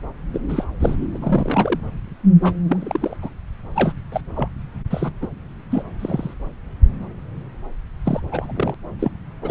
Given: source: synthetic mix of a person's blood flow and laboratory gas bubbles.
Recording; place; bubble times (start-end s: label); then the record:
Doppler ultrasound of blood flow; subclavian vein
0.34-0.41 s: bubbles
0.49-0.65 s: bubbles
0.80-1.08 s: bubbles
1.14-1.80 s: bubbles
2.42-2.54 s: bubbles
2.67-3.17 s: bubbles
3.21-3.29 s: bubbles
3.47-3.49 s: bubbles
3.74-3.93 s: bubbles
4.12-4.21 s: bubbles
4.36-4.48 s: bubbles
4.90-5.12 s: bubbles
5.21-5.28 s: bubbles
5.71-5.83 s: bubbles
5.99-6.34 s: bubbles
8.05-8.20 s: bubbles
8.31-8.53 s: bubbles
8.55-8.75 s: bubbles
8.99-9.12 s: bubbles
9.42-9.51 s: bubbles
From the record:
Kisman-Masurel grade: 232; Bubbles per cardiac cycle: several, 3 to 8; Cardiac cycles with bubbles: 50 to 99%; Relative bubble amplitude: moderate (0.250 to 0.450); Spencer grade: 3 (all of the cardiac periods contain showers or single bubble signals, but not dominating or overriding the cardiac motion signals); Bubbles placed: anywhere in the cardiac cycle